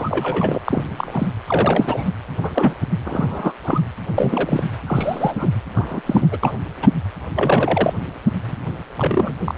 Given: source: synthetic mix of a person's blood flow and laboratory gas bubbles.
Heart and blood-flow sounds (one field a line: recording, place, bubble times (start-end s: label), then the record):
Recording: Doppler ultrasound of blood flow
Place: precordium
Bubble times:
0.00-0.61 s: bubbles
0.66-0.84 s: bubbles
0.96-1.27 s: bubbles
1.47-2.12 s: bubbles
2.42-2.75 s: bubbles
3.04-3.53 s: bubbles
3.63-3.81 s: bubbles
4.15-4.63 s: bubbles
4.87-5.50 s: bubbles
5.75-6.02 s: bubbles
6.06-6.29 s: bubbles
6.32-6.38 s: bubbles
6.43-6.54 s: bubbles
6.82-6.89 s: bubbles
7.35-7.93 s: bubbles
8.47-8.55 s: bubbles
8.96-9.36 s: bubbles
9.45-9.54 s: bubbles
From the record:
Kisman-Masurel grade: 232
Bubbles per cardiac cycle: several, 3 to 8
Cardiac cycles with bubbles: 50 to 99%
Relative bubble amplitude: moderate (0.250 to 0.450)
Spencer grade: 3 (all of the cardiac periods contain showers or single bubble signals, but not dominating or overriding the cardiac motion signals)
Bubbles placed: anywhere in the cardiac cycle